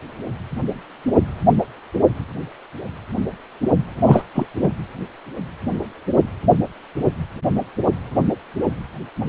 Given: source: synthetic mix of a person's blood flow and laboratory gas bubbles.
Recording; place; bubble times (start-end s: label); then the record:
Doppler ultrasound of blood flow; precordium
4.05-4.21 s: bubbles
4.34-4.46 s: bubbles
4.62-4.69 s: bubbles
From the record:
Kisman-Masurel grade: 213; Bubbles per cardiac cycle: several, 3 to 8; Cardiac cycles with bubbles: 1 to 10%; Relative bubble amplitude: loud (0.450 to 0.775); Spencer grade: 1 (occasional bubble signal discernible with the cardiac motion signal, with majority of cardiac periods free of bubbles); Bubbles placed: anywhere in the cardiac cycle